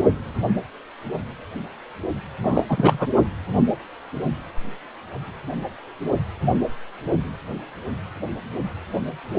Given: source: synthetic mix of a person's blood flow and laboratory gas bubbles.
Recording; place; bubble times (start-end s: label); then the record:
Doppler ultrasound of blood flow; precordium
2.43-2.64 s: bubbles
2.69-3.08 s: bubbles
From the record:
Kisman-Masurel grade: 212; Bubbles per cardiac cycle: several, 3 to 8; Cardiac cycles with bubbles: 1 to 10%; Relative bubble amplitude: moderate (0.250 to 0.450); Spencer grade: 1 (occasional bubble signal discernible with the cardiac motion signal, with majority of cardiac periods free of bubbles); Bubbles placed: anywhere in the cardiac cycle